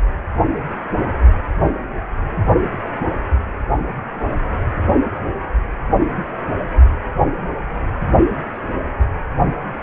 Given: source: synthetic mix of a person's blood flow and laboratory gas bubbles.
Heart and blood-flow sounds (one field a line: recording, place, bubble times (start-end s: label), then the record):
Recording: Doppler ultrasound of blood flow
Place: precordium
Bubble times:
no bubbles
From the record:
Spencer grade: 0 (complete lack of bubble signals)